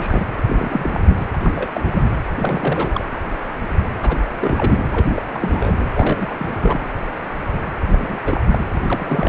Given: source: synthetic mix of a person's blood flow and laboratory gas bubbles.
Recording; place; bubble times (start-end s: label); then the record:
Doppler ultrasound of blood flow; precordium
0.00-0.25 s: bubbles
0.46-1.17 s: bubbles
1.33-1.39 s: bubbles
1.42-1.71 s: bubbles
1.74-2.02 s: bubbles
2.36-3.05 s: bubbles
4.03-4.18 s: bubbles
4.40-4.83 s: bubbles
4.93-5.22 s: bubbles
5.29-5.75 s: bubbles
5.95-6.88 s: bubbles
7.82-8.19 s: bubbles
8.24-8.41 s: bubbles
8.52-8.66 s: bubbles
8.72-8.80 s: bubbles
8.87-9.29 s: bubbles
From the record:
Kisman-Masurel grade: 332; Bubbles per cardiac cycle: rolling drumbeat, 9 or more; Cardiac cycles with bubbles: 50 to 99%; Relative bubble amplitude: moderate (0.250 to 0.450); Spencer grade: 3 (all of the cardiac periods contain showers or single bubble signals, but not dominating or overriding the cardiac motion signals); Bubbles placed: anywhere in the cardiac cycle